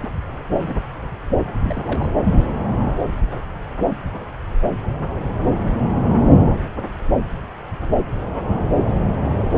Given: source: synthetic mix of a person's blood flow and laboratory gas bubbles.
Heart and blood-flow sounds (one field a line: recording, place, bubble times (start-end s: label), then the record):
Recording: Doppler ultrasound of blood flow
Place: subclavian vein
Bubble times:
0.00-0.09 s: bubbles
0.51-0.81 s: bubbles
1.62-2.25 s: bubbles
From the record:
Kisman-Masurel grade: 221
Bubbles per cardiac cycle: several, 3 to 8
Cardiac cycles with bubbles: 10 to 50%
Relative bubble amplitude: barely perceptible (0.100 to 0.250)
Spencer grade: 2 (many but less than half of the cardiac periods contain bubble signals, singularly or in groups)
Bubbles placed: anywhere in the cardiac cycle